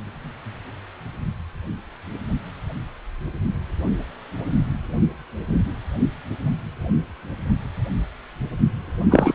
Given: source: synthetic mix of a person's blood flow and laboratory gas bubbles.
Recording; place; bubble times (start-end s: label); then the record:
Doppler ultrasound of blood flow; precordium
9.10-9.35 s: bubbles
From the record:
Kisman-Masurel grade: 213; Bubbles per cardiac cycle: several, 3 to 8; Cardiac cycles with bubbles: 1 to 10%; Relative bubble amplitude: loud (0.450 to 0.775); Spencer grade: 1 (occasional bubble signal discernible with the cardiac motion signal, with majority of cardiac periods free of bubbles); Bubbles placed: only in the low amplitude regions of the cardiac cycle